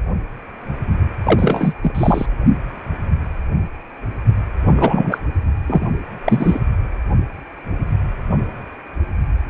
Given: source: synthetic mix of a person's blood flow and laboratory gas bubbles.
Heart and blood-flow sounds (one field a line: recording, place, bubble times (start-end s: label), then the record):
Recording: Doppler ultrasound of blood flow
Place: precordium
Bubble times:
1.23-1.73 s: bubbles
1.82-2.26 s: bubbles
4.64-5.18 s: bubbles
5.67-5.86 s: bubbles
6.26-6.59 s: bubbles
From the record:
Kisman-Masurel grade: 223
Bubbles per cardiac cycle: several, 3 to 8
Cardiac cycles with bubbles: 10 to 50%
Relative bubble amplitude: loud (0.450 to 0.775)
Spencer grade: 2 (many but less than half of the cardiac periods contain bubble signals, singularly or in groups)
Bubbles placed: only in the low amplitude regions of the cardiac cycle